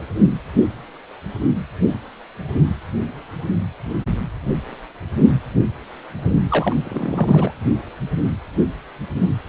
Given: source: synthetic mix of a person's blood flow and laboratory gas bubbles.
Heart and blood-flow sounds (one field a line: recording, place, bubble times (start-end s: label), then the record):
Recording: Doppler ultrasound of blood flow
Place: precordium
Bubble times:
6.49-6.76 s: bubbles
6.84-7.53 s: bubbles
From the record:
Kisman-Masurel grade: 212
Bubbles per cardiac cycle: several, 3 to 8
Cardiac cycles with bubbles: 1 to 10%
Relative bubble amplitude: moderate (0.250 to 0.450)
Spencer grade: 1 (occasional bubble signal discernible with the cardiac motion signal, with majority of cardiac periods free of bubbles)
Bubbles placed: anywhere in the cardiac cycle